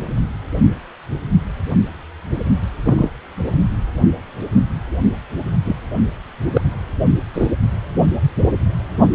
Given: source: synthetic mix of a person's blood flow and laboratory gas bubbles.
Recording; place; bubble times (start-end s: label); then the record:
Doppler ultrasound of blood flow; precordium
2.85-3.09 s: bubbles
5.65-5.76 s: bubbles
6.53-6.61 s: bubbles
7.33-7.48 s: bubbles
From the record:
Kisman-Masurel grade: 123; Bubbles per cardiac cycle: 1 to 2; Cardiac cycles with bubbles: 10 to 50%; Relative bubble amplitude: loud (0.450 to 0.775); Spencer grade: 2 (many but less than half of the cardiac periods contain bubble signals, singularly or in groups); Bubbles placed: only in the low amplitude regions of the cardiac cycle